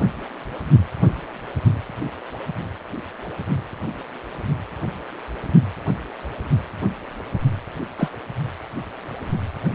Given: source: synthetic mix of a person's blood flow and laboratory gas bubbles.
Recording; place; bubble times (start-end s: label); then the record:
Doppler ultrasound of blood flow; precordium
7.98-8.10 s: bubbles
From the record:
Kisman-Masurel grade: 123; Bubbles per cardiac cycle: 1 to 2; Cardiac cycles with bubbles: 10 to 50%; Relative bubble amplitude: loud (0.450 to 0.775); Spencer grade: 2 (many but less than half of the cardiac periods contain bubble signals, singularly or in groups); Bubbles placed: only in the low amplitude regions of the cardiac cycle